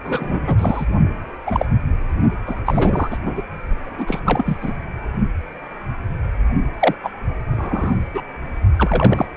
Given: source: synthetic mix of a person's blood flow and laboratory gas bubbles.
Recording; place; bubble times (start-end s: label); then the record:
Doppler ultrasound of blood flow; precordium
0.04-0.40 s: bubbles
0.42-0.85 s: bubbles
1.46-1.66 s: bubbles
2.46-2.61 s: bubbles
2.65-3.17 s: bubbles
3.24-3.42 s: bubbles
3.84-4.19 s: bubbles
4.25-4.58 s: bubbles
4.62-4.73 s: bubbles
6.79-6.94 s: bubbles
7.03-7.10 s: bubbles
7.51-7.95 s: bubbles
8.14-8.21 s: bubbles
8.76-9.26 s: bubbles
From the record:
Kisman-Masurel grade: 232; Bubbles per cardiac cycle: several, 3 to 8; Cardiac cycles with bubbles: 50 to 99%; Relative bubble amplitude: moderate (0.250 to 0.450); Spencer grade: 3 (all of the cardiac periods contain showers or single bubble signals, but not dominating or overriding the cardiac motion signals); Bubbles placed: only in the low amplitude regions of the cardiac cycle